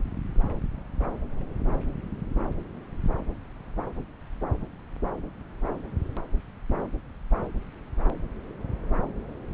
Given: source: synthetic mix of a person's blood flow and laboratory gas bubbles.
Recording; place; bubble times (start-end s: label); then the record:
Doppler ultrasound of blood flow; subclavian vein
no bubbles
From the record:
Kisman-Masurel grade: 000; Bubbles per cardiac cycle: 0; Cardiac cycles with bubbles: 0%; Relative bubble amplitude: no bubbles discernible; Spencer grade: 0 (complete lack of bubble signals)